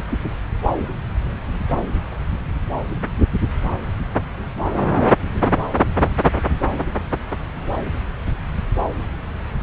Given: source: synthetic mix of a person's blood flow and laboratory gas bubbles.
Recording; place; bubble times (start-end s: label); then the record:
Doppler ultrasound of blood flow; subclavian vein
no bubbles
From the record:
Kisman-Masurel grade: 000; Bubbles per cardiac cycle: 0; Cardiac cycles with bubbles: 0%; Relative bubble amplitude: no bubbles discernible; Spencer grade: 0 (complete lack of bubble signals)